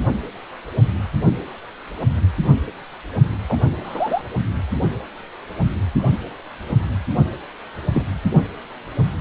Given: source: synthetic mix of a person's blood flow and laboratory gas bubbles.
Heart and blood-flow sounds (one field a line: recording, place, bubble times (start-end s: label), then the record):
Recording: Doppler ultrasound of blood flow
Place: precordium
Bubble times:
3.48-3.56 s: bubbles
3.84-4.22 s: bubbles
7.93-8.03 s: bubbles
From the record:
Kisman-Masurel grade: 122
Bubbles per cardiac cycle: 1 to 2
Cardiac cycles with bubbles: 10 to 50%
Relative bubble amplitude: moderate (0.250 to 0.450)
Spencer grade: 2 (many but less than half of the cardiac periods contain bubble signals, singularly or in groups)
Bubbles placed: only in the low amplitude regions of the cardiac cycle